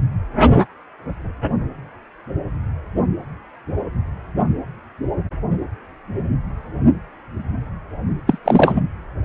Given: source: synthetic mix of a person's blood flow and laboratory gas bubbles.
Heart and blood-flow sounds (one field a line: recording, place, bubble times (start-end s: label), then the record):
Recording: Doppler ultrasound of blood flow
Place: precordium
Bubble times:
8.27-8.38 s: bubbles
8.45-8.82 s: bubbles
From the record:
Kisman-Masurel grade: 213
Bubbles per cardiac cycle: several, 3 to 8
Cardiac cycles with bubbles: 1 to 10%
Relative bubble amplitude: loud (0.450 to 0.775)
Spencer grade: 1 (occasional bubble signal discernible with the cardiac motion signal, with majority of cardiac periods free of bubbles)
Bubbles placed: only in the low amplitude regions of the cardiac cycle